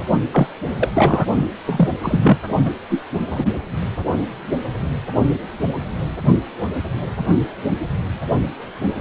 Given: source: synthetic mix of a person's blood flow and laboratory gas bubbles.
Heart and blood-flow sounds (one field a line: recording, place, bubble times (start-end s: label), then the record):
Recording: Doppler ultrasound of blood flow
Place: precordium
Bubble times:
0.32-0.47 s: bubbles
0.80-1.25 s: bubbles
1.66-1.89 s: bubbles
2.02-2.38 s: bubbles
2.65-2.71 s: bubbles
2.90-3.03 s: bubbles
3.30-3.46 s: bubbles
From the record:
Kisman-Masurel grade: 223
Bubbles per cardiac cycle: several, 3 to 8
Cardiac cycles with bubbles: 10 to 50%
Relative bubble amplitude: loud (0.450 to 0.775)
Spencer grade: 2 (many but less than half of the cardiac periods contain bubble signals, singularly or in groups)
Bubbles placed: only in the low amplitude regions of the cardiac cycle